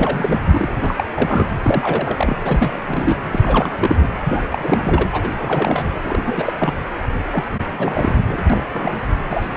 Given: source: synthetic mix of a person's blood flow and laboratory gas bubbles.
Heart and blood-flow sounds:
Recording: Doppler ultrasound of blood flow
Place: precordium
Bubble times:
0.00-0.40 s: bubbles
0.52-0.68 s: bubbles
0.81-0.94 s: bubbles
0.97-1.04 s: bubbles
1.16-1.47 s: bubbles
1.64-2.37 s: bubbles
2.44-3.17 s: bubbles
3.31-4.08 s: bubbles
4.28-4.43 s: bubbles
4.51-5.08 s: bubbles
5.12-5.30 s: bubbles
5.38-5.85 s: bubbles
6.04-6.53 s: bubbles
6.58-6.82 s: bubbles
7.32-7.45 s: bubbles
7.67-8.20 s: bubbles
8.28-8.42 s: bubbles
8.50-8.63 s: bubbles
8.74-9.07 s: bubbles
9.29-9.57 s: bubbles
From the record:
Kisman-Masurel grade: 342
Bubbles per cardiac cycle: rolling drumbeat, 9 or more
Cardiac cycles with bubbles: 100%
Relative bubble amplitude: moderate (0.250 to 0.450)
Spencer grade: 3 (all of the cardiac periods contain showers or single bubble signals, but not dominating or overriding the cardiac motion signals)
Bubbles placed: anywhere in the cardiac cycle

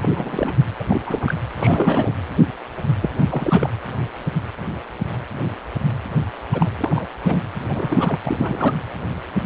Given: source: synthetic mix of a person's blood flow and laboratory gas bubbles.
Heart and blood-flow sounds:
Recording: Doppler ultrasound of blood flow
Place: precordium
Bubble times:
0.02-0.08 s: bubbles
0.14-0.55 s: bubbles
0.78-0.84 s: bubbles
0.87-1.02 s: bubbles
1.06-1.34 s: bubbles
1.57-2.16 s: bubbles
3.01-3.10 s: bubbles
3.19-3.70 s: bubbles
6.52-6.70 s: bubbles
6.79-7.06 s: bubbles
7.23-7.39 s: bubbles
7.68-8.20 s: bubbles
8.24-8.74 s: bubbles
From the record:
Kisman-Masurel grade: 232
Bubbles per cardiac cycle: several, 3 to 8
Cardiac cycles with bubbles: 50 to 99%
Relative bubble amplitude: moderate (0.250 to 0.450)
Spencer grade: 3 (all of the cardiac periods contain showers or single bubble signals, but not dominating or overriding the cardiac motion signals)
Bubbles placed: anywhere in the cardiac cycle

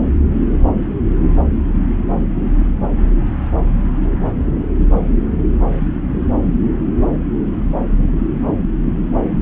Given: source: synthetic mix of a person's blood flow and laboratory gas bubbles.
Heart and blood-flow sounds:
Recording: Doppler ultrasound of blood flow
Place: subclavian vein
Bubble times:
no bubbles
From the record:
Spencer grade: 0 (complete lack of bubble signals)

